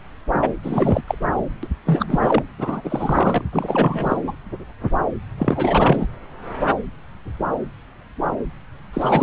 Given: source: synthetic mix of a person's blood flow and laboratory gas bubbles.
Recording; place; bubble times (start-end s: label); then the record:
Doppler ultrasound of blood flow; subclavian vein
0.41-0.54 s: bubbles
0.62-1.02 s: bubbles
1.07-1.15 s: bubbles
1.62-1.68 s: bubbles
1.85-2.43 s: bubbles
2.58-3.45 s: bubbles
3.52-4.17 s: bubbles
4.24-4.35 s: bubbles
5.38-6.07 s: bubbles
8.93-9.23 s: bubbles
From the record:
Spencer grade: 3 (all of the cardiac periods contain showers or single bubble signals, but not dominating or overriding the cardiac motion signals); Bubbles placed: anywhere in the cardiac cycle